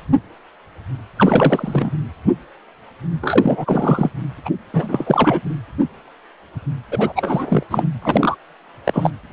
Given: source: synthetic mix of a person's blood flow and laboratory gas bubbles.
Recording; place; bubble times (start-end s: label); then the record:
Doppler ultrasound of blood flow; precordium
1.16-2.06 s: bubbles
3.21-4.10 s: bubbles
4.45-4.50 s: bubbles
4.73-5.41 s: bubbles
6.91-7.63 s: bubbles
7.71-7.88 s: bubbles
8.02-8.36 s: bubbles
8.85-9.11 s: bubbles
From the record:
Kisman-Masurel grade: 333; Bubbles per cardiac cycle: rolling drumbeat, 9 or more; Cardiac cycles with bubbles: 50 to 99%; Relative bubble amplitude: loud (0.450 to 0.775); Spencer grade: 3 (all of the cardiac periods contain showers or single bubble signals, but not dominating or overriding the cardiac motion signals); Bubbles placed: anywhere in the cardiac cycle